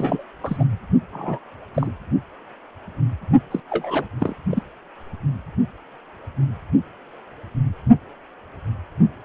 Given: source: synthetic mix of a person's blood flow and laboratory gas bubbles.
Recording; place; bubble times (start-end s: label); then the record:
Doppler ultrasound of blood flow; precordium
0.00-0.24 s: bubbles
0.42-0.64 s: bubbles
1.12-1.39 s: bubbles
1.75-1.92 s: bubbles
3.51-3.60 s: bubbles
3.70-4.04 s: bubbles
4.20-4.34 s: bubbles
4.50-4.62 s: bubbles
From the record:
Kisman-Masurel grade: 222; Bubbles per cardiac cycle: several, 3 to 8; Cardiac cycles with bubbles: 10 to 50%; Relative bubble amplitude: moderate (0.250 to 0.450); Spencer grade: 2 (many but less than half of the cardiac periods contain bubble signals, singularly or in groups); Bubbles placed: only in the low amplitude regions of the cardiac cycle